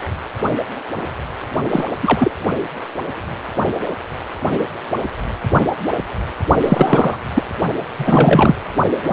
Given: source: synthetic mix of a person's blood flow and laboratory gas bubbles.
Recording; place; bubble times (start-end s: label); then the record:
Doppler ultrasound of blood flow; precordium
1.71-1.85 s: bubbles
2.02-2.31 s: bubbles
6.65-7.17 s: bubbles
7.34-7.42 s: bubbles
7.97-8.55 s: bubbles
9.03-9.13 s: bubbles
From the record:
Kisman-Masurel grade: 223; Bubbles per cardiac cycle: several, 3 to 8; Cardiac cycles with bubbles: 10 to 50%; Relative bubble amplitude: loud (0.450 to 0.775); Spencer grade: 2 (many but less than half of the cardiac periods contain bubble signals, singularly or in groups); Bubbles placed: only in the low amplitude regions of the cardiac cycle